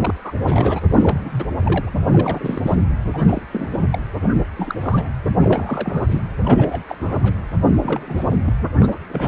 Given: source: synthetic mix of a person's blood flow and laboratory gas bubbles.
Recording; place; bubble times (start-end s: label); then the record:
Doppler ultrasound of blood flow; precordium
0.00-0.14 s: bubbles
0.24-0.33 s: bubbles
0.38-0.81 s: bubbles
0.89-1.47 s: bubbles
1.61-1.93 s: bubbles
2.08-2.75 s: bubbles
3.12-3.42 s: bubbles
3.52-3.69 s: bubbles
3.71-3.84 s: bubbles
3.92-3.99 s: bubbles
4.22-4.30 s: bubbles
4.34-4.44 s: bubbles
4.56-4.75 s: bubbles
4.80-5.07 s: bubbles
5.41-6.20 s: bubbles
6.38-6.81 s: bubbles
6.87-6.96 s: bubbles
7.00-7.20 s: bubbles
7.22-7.34 s: bubbles
7.82-8.01 s: bubbles
8.06-8.36 s: bubbles
8.46-8.53 s: bubbles
8.80-8.97 s: bubbles
9.09-9.28 s: bubbles
From the record:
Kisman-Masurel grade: 342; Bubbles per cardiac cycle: rolling drumbeat, 9 or more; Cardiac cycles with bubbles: 100%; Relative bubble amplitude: moderate (0.250 to 0.450); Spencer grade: 3 (all of the cardiac periods contain showers or single bubble signals, but not dominating or overriding the cardiac motion signals); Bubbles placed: anywhere in the cardiac cycle